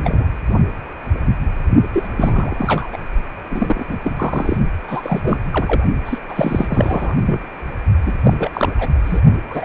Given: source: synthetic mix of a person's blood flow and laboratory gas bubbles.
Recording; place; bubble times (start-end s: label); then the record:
Doppler ultrasound of blood flow; precordium
0.00-0.24 s: bubbles
1.93-2.08 s: bubbles
2.17-2.87 s: bubbles
2.93-2.99 s: bubbles
3.49-3.97 s: bubbles
4.03-4.57 s: bubbles
4.88-5.38 s: bubbles
5.51-5.83 s: bubbles
6.05-6.18 s: bubbles
6.29-7.14 s: bubbles
7.25-7.41 s: bubbles
8.05-8.14 s: bubbles
8.24-8.33 s: bubbles
8.38-8.50 s: bubbles
8.53-8.74 s: bubbles
8.78-8.87 s: bubbles
9.04-9.21 s: bubbles
9.49-9.65 s: bubbles
From the record:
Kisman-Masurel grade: 332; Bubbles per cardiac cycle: rolling drumbeat, 9 or more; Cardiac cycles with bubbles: 50 to 99%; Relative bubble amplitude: moderate (0.250 to 0.450); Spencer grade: 3 (all of the cardiac periods contain showers or single bubble signals, but not dominating or overriding the cardiac motion signals); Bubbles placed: only in the low amplitude regions of the cardiac cycle